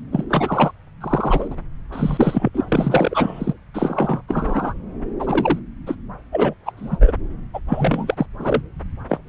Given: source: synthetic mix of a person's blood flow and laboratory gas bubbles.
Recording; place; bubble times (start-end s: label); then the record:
Doppler ultrasound of blood flow; subclavian vein
0.12-0.24 s: bubbles
0.29-0.71 s: bubbles
1.00-1.48 s: bubbles
1.51-1.55 s: bubbles
1.92-2.49 s: bubbles
2.54-2.66 s: bubbles
2.68-3.54 s: bubbles
3.73-4.21 s: bubbles
4.28-4.74 s: bubbles
5.19-5.59 s: bubbles
5.86-5.96 s: bubbles
6.32-6.54 s: bubbles
6.65-6.72 s: bubbles
6.76-6.97 s: bubbles
7.00-7.11 s: bubbles
7.54-7.60 s: bubbles
7.67-8.26 s: bubbles
8.39-8.62 s: bubbles
9.09-9.19 s: bubbles
From the record:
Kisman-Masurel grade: 243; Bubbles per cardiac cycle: several, 3 to 8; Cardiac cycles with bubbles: 100%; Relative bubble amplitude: loud (0.450 to 0.775); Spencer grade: 3 (all of the cardiac periods contain showers or single bubble signals, but not dominating or overriding the cardiac motion signals); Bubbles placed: anywhere in the cardiac cycle